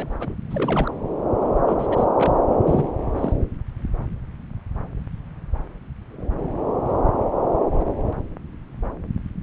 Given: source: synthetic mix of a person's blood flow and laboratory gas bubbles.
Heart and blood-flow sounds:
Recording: Doppler ultrasound of blood flow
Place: subclavian vein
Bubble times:
0.00-0.17 s: bubbles
0.20-0.34 s: bubbles
0.50-0.96 s: bubbles
1.68-1.76 s: bubbles
1.79-1.86 s: bubbles
1.89-2.05 s: bubbles
2.18-2.33 s: bubbles
2.51-2.57 s: bubbles
2.66-2.83 s: bubbles
3.16-3.33 s: bubbles
From the record:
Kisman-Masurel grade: 221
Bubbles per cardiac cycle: several, 3 to 8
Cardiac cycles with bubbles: 10 to 50%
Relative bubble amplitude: barely perceptible (0.100 to 0.250)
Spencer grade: 2 (many but less than half of the cardiac periods contain bubble signals, singularly or in groups)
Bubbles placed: anywhere in the cardiac cycle

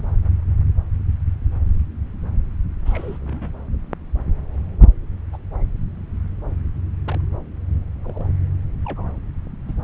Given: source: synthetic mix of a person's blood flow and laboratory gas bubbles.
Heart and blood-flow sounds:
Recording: Doppler ultrasound of blood flow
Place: subclavian vein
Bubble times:
2.85-3.17 s: bubbles
3.21-3.50 s: bubbles
5.33-5.38 s: bubbles
7.08-7.21 s: bubbles
8.04-8.26 s: bubbles
8.85-9.06 s: bubbles
9.68-9.73 s: bubbles
From the record:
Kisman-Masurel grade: 121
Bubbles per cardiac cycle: 1 to 2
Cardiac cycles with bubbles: 10 to 50%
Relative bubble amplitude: barely perceptible (0.100 to 0.250)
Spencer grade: 2 (many but less than half of the cardiac periods contain bubble signals, singularly or in groups)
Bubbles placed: anywhere in the cardiac cycle

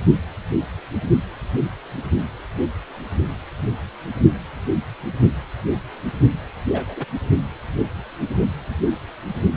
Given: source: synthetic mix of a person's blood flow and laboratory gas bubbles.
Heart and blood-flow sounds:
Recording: Doppler ultrasound of blood flow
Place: precordium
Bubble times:
6.73-7.05 s: bubbles
From the record:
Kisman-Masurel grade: 112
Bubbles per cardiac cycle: 1 to 2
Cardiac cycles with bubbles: 1 to 10%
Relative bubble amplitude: moderate (0.250 to 0.450)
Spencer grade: 1 (occasional bubble signal discernible with the cardiac motion signal, with majority of cardiac periods free of bubbles)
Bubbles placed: anywhere in the cardiac cycle

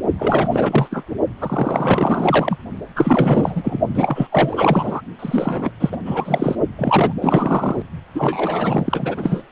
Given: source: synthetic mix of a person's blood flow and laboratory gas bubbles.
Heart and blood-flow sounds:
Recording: Doppler ultrasound of blood flow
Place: precordium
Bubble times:
0.18-0.48 s: bubbles
0.51-1.03 s: bubbles
1.40-2.57 s: bubbles
2.96-3.79 s: bubbles
3.94-4.27 s: bubbles
4.32-5.01 s: bubbles
5.19-5.70 s: bubbles
5.79-5.98 s: bubbles
6.05-6.55 s: bubbles
6.78-7.13 s: bubbles
7.21-7.82 s: bubbles
8.15-9.42 s: bubbles
From the record:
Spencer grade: 4 (maximum detectable bubble signal sounding continuously throughout systole and diastole of every cardiac period, and overriding the amplitude of the normal cardiac signals)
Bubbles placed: only in the low amplitude regions of the cardiac cycle

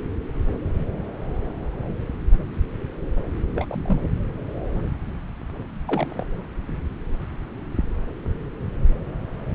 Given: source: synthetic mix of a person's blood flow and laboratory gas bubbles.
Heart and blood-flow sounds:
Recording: Doppler ultrasound of blood flow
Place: subclavian vein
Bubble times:
3.54-4.01 s: bubbles
5.87-6.26 s: bubbles
From the record:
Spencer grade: 2 (many but less than half of the cardiac periods contain bubble signals, singularly or in groups)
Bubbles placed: anywhere in the cardiac cycle

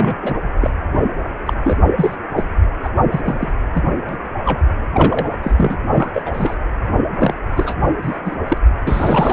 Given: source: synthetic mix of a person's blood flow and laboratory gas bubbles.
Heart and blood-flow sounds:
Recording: Doppler ultrasound of blood flow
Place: precordium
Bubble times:
0.00-0.15 s: bubbles
0.21-0.39 s: bubbles
0.61-0.74 s: bubbles
1.45-1.53 s: bubbles
1.64-1.77 s: bubbles
1.98-2.17 s: bubbles
2.36-2.44 s: bubbles
2.83-2.89 s: bubbles
3.10-3.21 s: bubbles
3.25-3.52 s: bubbles
3.74-3.82 s: bubbles
4.08-4.17 s: bubbles
4.45-4.60 s: bubbles
4.94-5.39 s: bubbles
5.43-5.52 s: bubbles
5.57-5.77 s: bubbles
5.93-6.10 s: bubbles
6.14-6.54 s: bubbles
7.20-7.34 s: bubbles
7.55-7.78 s: bubbles
8.03-8.19 s: bubbles
8.24-8.35 s: bubbles
8.48-8.57 s: bubbles
8.85-9.33 s: bubbles
From the record:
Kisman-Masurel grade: 242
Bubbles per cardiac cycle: several, 3 to 8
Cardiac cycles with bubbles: 100%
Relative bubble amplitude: moderate (0.250 to 0.450)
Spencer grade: 3 (all of the cardiac periods contain showers or single bubble signals, but not dominating or overriding the cardiac motion signals)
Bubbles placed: anywhere in the cardiac cycle

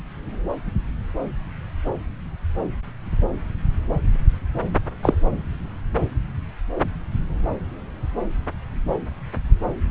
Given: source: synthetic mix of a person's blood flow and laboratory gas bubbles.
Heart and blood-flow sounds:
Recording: Doppler ultrasound of blood flow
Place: subclavian vein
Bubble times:
5.03-5.14 s: bubbles
From the record:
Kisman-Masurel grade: 113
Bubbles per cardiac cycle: 1 to 2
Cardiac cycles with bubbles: 1 to 10%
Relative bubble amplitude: loud (0.450 to 0.775)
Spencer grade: 1 (occasional bubble signal discernible with the cardiac motion signal, with majority of cardiac periods free of bubbles)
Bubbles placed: anywhere in the cardiac cycle

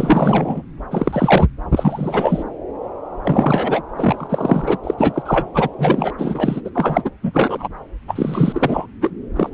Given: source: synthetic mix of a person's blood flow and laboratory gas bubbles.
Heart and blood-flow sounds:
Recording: Doppler ultrasound of blood flow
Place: subclavian vein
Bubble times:
0.00-0.62 s: bubbles
0.91-1.47 s: bubbles
1.71-2.44 s: bubbles
3.24-3.83 s: bubbles
3.97-4.77 s: bubbles
4.83-4.94 s: bubbles
4.97-5.22 s: bubbles
5.25-5.51 s: bubbles
5.54-5.68 s: bubbles
5.79-6.12 s: bubbles
6.18-6.61 s: bubbles
6.64-6.70 s: bubbles
6.75-7.10 s: bubbles
7.22-7.68 s: bubbles
8.07-8.87 s: bubbles
9.02-9.11 s: bubbles
9.36-9.49 s: bubbles
From the record:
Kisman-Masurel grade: 343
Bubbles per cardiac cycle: rolling drumbeat, 9 or more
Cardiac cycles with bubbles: 100%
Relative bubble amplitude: loud (0.450 to 0.775)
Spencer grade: 3 (all of the cardiac periods contain showers or single bubble signals, but not dominating or overriding the cardiac motion signals)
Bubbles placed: anywhere in the cardiac cycle

